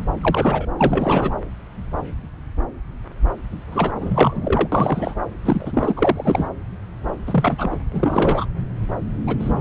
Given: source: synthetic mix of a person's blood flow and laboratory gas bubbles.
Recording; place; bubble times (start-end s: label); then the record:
Doppler ultrasound of blood flow; subclavian vein
0.21-0.68 s: bubbles
0.79-1.31 s: bubbles
3.71-3.92 s: bubbles
3.96-4.68 s: bubbles
4.72-5.15 s: bubbles
5.45-5.93 s: bubbles
5.96-6.49 s: bubbles
7.26-7.76 s: bubbles
7.92-8.46 s: bubbles
9.27-9.36 s: bubbles
9.39-9.61 s: bubbles
From the record:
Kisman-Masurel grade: 332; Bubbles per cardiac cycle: rolling drumbeat, 9 or more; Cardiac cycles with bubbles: 50 to 99%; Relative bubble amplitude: moderate (0.250 to 0.450); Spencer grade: 3 (all of the cardiac periods contain showers or single bubble signals, but not dominating or overriding the cardiac motion signals); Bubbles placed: anywhere in the cardiac cycle